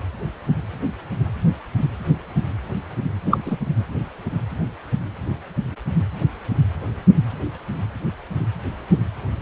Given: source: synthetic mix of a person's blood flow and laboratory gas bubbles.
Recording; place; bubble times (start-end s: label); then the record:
Doppler ultrasound of blood flow; precordium
3.25-3.38 s: bubbles
3.46-3.56 s: bubbles
From the record:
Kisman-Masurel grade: 213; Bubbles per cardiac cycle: several, 3 to 8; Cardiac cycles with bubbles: 1 to 10%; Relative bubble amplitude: loud (0.450 to 0.775); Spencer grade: 1 (occasional bubble signal discernible with the cardiac motion signal, with majority of cardiac periods free of bubbles); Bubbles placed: anywhere in the cardiac cycle